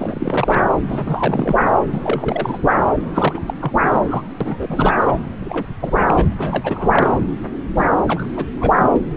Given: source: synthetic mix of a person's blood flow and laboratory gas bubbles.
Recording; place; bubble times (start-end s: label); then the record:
Doppler ultrasound of blood flow; subclavian vein
0.00-0.66 s: bubbles
0.87-1.56 s: bubbles
1.92-2.59 s: bubbles
3.14-3.42 s: bubbles
3.47-3.53 s: bubbles
3.60-3.72 s: bubbles
3.86-4.02 s: bubbles
4.10-4.23 s: bubbles
4.41-4.96 s: bubbles
5.00-5.12 s: bubbles
5.40-5.67 s: bubbles
5.80-6.25 s: bubbles
6.29-6.33 s: bubbles
6.37-7.21 s: bubbles
7.75-7.86 s: bubbles
8.06-8.30 s: bubbles
8.36-8.45 s: bubbles
8.60-8.75 s: bubbles
8.79-8.89 s: bubbles
8.93-9.01 s: bubbles
From the record:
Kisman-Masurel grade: 342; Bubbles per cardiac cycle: rolling drumbeat, 9 or more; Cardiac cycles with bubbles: 100%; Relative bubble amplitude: moderate (0.250 to 0.450); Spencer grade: 3 (all of the cardiac periods contain showers or single bubble signals, but not dominating or overriding the cardiac motion signals); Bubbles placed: anywhere in the cardiac cycle